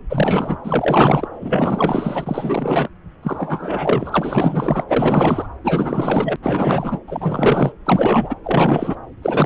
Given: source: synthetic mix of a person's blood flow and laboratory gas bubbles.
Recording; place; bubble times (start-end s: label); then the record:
Doppler ultrasound of blood flow; subclavian vein
0.09-0.57 s: bubbles
0.64-1.28 s: bubbles
1.41-2.89 s: bubbles
3.22-4.84 s: bubbles
4.88-5.48 s: bubbles
5.63-6.36 s: bubbles
6.43-7.00 s: bubbles
7.07-7.72 s: bubbles
7.86-8.36 s: bubbles
8.44-8.96 s: bubbles
9.22-9.46 s: bubbles
From the record:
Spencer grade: 4 (maximum detectable bubble signal sounding continuously throughout systole and diastole of every cardiac period, and overriding the amplitude of the normal cardiac signals); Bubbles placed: anywhere in the cardiac cycle